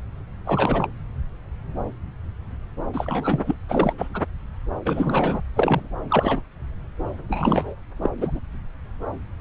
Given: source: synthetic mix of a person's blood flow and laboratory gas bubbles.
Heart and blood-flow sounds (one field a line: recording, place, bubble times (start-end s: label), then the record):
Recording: Doppler ultrasound of blood flow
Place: subclavian vein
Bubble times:
0.46-0.86 s: bubbles
2.94-3.55 s: bubbles
3.69-3.93 s: bubbles
3.98-4.08 s: bubbles
4.13-4.21 s: bubbles
4.85-5.41 s: bubbles
5.56-5.88 s: bubbles
6.08-6.42 s: bubbles
7.29-7.75 s: bubbles
8.01-8.10 s: bubbles
8.17-8.39 s: bubbles
From the record:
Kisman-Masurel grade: 232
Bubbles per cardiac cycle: several, 3 to 8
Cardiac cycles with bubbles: 50 to 99%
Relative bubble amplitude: moderate (0.250 to 0.450)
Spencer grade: 3 (all of the cardiac periods contain showers or single bubble signals, but not dominating or overriding the cardiac motion signals)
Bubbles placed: anywhere in the cardiac cycle